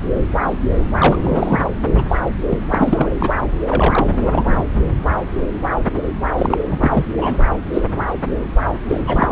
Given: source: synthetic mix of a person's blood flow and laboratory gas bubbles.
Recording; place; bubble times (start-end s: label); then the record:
Doppler ultrasound of blood flow; subclavian vein
0.98-1.60 s: bubbles
1.98-2.02 s: bubbles
2.08-2.19 s: bubbles
2.49-2.58 s: bubbles
2.71-3.10 s: bubbles
3.13-3.29 s: bubbles
3.70-4.63 s: bubbles
6.37-6.58 s: bubbles
6.71-7.04 s: bubbles
7.17-7.36 s: bubbles
7.73-7.81 s: bubbles
8.88-9.01 s: bubbles
9.06-9.32 s: bubbles
From the record:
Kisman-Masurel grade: 333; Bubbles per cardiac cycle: rolling drumbeat, 9 or more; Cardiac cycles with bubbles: 50 to 99%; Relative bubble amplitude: loud (0.450 to 0.775); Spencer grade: 3 (all of the cardiac periods contain showers or single bubble signals, but not dominating or overriding the cardiac motion signals); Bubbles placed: anywhere in the cardiac cycle